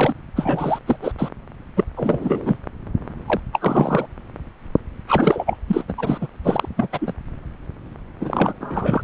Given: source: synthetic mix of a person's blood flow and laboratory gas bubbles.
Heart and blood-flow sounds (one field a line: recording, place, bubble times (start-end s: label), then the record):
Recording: Doppler ultrasound of blood flow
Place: subclavian vein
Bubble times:
0.00-0.14 s: bubbles
0.33-0.79 s: bubbles
0.85-0.96 s: bubbles
1.01-1.12 s: bubbles
1.19-1.29 s: bubbles
1.76-1.84 s: bubbles
1.97-2.60 s: bubbles
3.26-3.40 s: bubbles
3.52-4.06 s: bubbles
5.06-5.57 s: bubbles
5.67-5.84 s: bubbles
5.88-5.94 s: bubbles
5.97-6.27 s: bubbles
6.43-6.68 s: bubbles
6.76-6.88 s: bubbles
6.92-6.98 s: bubbles
7.01-7.13 s: bubbles
8.21-8.54 s: bubbles
8.60-9.02 s: bubbles
From the record:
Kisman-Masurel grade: 333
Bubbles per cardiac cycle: rolling drumbeat, 9 or more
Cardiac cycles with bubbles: 50 to 99%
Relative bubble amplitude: loud (0.450 to 0.775)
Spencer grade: 3 (all of the cardiac periods contain showers or single bubble signals, but not dominating or overriding the cardiac motion signals)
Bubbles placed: anywhere in the cardiac cycle